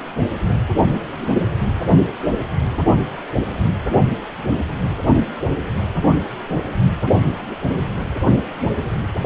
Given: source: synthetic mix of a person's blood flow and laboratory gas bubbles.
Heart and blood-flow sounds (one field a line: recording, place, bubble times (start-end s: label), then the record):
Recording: Doppler ultrasound of blood flow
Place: precordium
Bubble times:
7.27-7.46 s: bubbles
From the record:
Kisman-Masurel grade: 111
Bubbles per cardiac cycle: 1 to 2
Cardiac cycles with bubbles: 1 to 10%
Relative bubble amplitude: barely perceptible (0.100 to 0.250)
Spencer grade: 1 (occasional bubble signal discernible with the cardiac motion signal, with majority of cardiac periods free of bubbles)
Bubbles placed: anywhere in the cardiac cycle